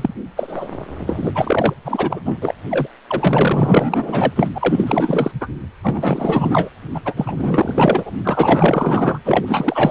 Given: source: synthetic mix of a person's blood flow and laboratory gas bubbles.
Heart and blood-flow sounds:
Doppler ultrasound of blood flow; precordium
0.00-0.13 s: bubbles
0.36-0.77 s: bubbles
1.06-1.32 s: bubbles
1.34-1.74 s: bubbles
1.84-2.20 s: bubbles
2.25-2.55 s: bubbles
2.70-2.88 s: bubbles
3.07-4.33 s: bubbles
4.36-4.48 s: bubbles
4.54-5.32 s: bubbles
5.41-5.48 s: bubbles
5.83-6.69 s: bubbles
6.94-7.00 s: bubbles
7.04-7.13 s: bubbles
7.16-8.14 s: bubbles
8.24-9.19 s: bubbles
9.25-9.91 s: bubbles
From the record:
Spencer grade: 4 (maximum detectable bubble signal sounding continuously throughout systole and diastole of every cardiac period, and overriding the amplitude of the normal cardiac signals); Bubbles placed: anywhere in the cardiac cycle

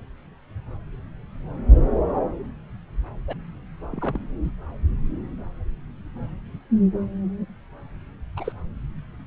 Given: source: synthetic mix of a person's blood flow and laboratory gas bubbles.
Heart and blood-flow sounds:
Doppler ultrasound of blood flow; subclavian vein
3.27-3.33 s: bubbles
3.92-4.19 s: bubbles
4.44-4.51 s: bubbles
8.37-8.53 s: bubbles
From the record:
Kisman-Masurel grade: 121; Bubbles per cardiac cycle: 1 to 2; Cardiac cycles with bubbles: 10 to 50%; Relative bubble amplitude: barely perceptible (0.100 to 0.250); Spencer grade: 2 (many but less than half of the cardiac periods contain bubble signals, singularly or in groups); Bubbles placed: anywhere in the cardiac cycle

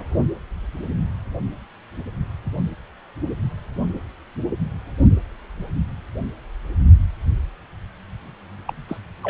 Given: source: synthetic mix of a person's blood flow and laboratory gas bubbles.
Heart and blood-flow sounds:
Doppler ultrasound of blood flow; precordium
8.65-8.73 s: bubbles
8.88-8.97 s: bubbles
9.23-9.30 s: bubbles
From the record:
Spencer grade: 1 (occasional bubble signal discernible with the cardiac motion signal, with majority of cardiac periods free of bubbles); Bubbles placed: only in the low amplitude regions of the cardiac cycle

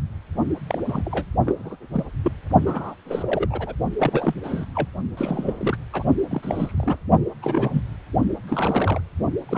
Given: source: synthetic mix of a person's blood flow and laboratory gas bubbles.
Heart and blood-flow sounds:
Doppler ultrasound of blood flow; precordium
0.67-0.79 s: bubbles
0.85-1.25 s: bubbles
1.45-1.77 s: bubbles
1.93-2.04 s: bubbles
2.23-2.31 s: bubbles
2.66-2.95 s: bubbles
3.06-3.73 s: bubbles
3.98-4.34 s: bubbles
4.43-4.65 s: bubbles
4.75-4.88 s: bubbles
5.17-5.76 s: bubbles
5.92-6.03 s: bubbles
6.30-6.98 s: bubbles
7.42-7.83 s: bubbles
8.47-9.01 s: bubbles
9.49-9.58 s: bubbles
From the record:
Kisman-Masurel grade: 242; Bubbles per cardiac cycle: several, 3 to 8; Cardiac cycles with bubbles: 100%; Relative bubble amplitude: moderate (0.250 to 0.450); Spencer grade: 3 (all of the cardiac periods contain showers or single bubble signals, but not dominating or overriding the cardiac motion signals); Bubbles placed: only in the low amplitude regions of the cardiac cycle

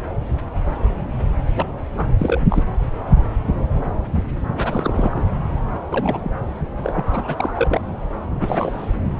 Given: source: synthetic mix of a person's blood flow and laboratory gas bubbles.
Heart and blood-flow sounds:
Doppler ultrasound of blood flow; subclavian vein
1.55-1.66 s: bubbles
1.97-2.07 s: bubbles
2.18-2.41 s: bubbles
2.49-2.63 s: bubbles
4.57-5.24 s: bubbles
5.91-6.36 s: bubbles
6.83-7.81 s: bubbles
8.41-8.86 s: bubbles
From the record:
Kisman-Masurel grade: 232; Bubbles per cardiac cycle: several, 3 to 8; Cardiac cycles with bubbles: 50 to 99%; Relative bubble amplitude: moderate (0.250 to 0.450); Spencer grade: 3 (all of the cardiac periods contain showers or single bubble signals, but not dominating or overriding the cardiac motion signals); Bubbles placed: anywhere in the cardiac cycle

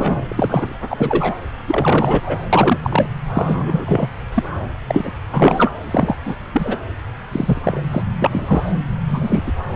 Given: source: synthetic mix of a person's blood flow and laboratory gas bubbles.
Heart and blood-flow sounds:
Doppler ultrasound of blood flow; subclavian vein
0.00-0.23 s: bubbles
0.30-0.74 s: bubbles
0.89-1.34 s: bubbles
1.67-2.21 s: bubbles
2.26-2.38 s: bubbles
2.52-2.77 s: bubbles
2.83-3.08 s: bubbles
3.34-4.09 s: bubbles
4.32-4.43 s: bubbles
4.87-5.11 s: bubbles
5.32-5.71 s: bubbles
5.84-6.16 s: bubbles
6.25-6.36 s: bubbles
6.53-6.78 s: bubbles
7.32-7.83 s: bubbles
7.91-8.03 s: bubbles
8.19-8.72 s: bubbles
9.07-9.53 s: bubbles
9.70-9.75 s: bubbles
From the record:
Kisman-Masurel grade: 243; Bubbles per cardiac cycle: several, 3 to 8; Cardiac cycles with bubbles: 100%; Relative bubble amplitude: loud (0.450 to 0.775); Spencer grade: 3 (all of the cardiac periods contain showers or single bubble signals, but not dominating or overriding the cardiac motion signals); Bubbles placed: anywhere in the cardiac cycle

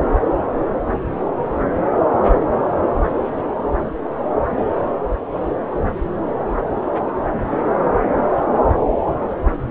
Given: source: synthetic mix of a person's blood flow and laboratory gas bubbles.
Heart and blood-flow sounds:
Doppler ultrasound of blood flow; subclavian vein
no bubbles
From the record:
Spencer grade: 0 (complete lack of bubble signals)

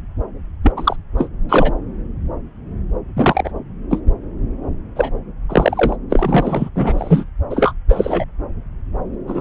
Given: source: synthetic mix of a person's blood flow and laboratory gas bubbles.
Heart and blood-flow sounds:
Doppler ultrasound of blood flow; subclavian vein
0.63-0.72 s: bubbles
0.77-0.97 s: bubbles
1.18-1.28 s: bubbles
1.49-1.71 s: bubbles
3.16-3.52 s: bubbles
3.90-3.99 s: bubbles
4.96-5.10 s: bubbles
5.49-5.96 s: bubbles
6.09-6.69 s: bubbles
6.74-7.25 s: bubbles
7.50-7.74 s: bubbles
7.88-8.25 s: bubbles
9.27-9.41 s: bubbles
From the record:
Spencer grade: 3 (all of the cardiac periods contain showers or single bubble signals, but not dominating or overriding the cardiac motion signals); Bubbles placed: anywhere in the cardiac cycle

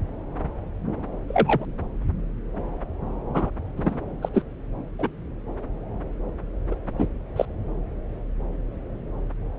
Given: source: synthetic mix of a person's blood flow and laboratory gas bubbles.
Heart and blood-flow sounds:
Doppler ultrasound of blood flow; subclavian vein
1.28-1.65 s: bubbles
3.33-3.51 s: bubbles
3.76-3.98 s: bubbles
4.22-4.29 s: bubbles
4.33-4.42 s: bubbles
4.98-5.08 s: bubbles
6.71-6.75 s: bubbles
6.98-7.07 s: bubbles
7.36-7.46 s: bubbles
From the record:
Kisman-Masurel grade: 123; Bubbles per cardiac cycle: 1 to 2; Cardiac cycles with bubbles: 10 to 50%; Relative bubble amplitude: loud (0.450 to 0.775); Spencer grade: 2 (many but less than half of the cardiac periods contain bubble signals, singularly or in groups); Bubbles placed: anywhere in the cardiac cycle

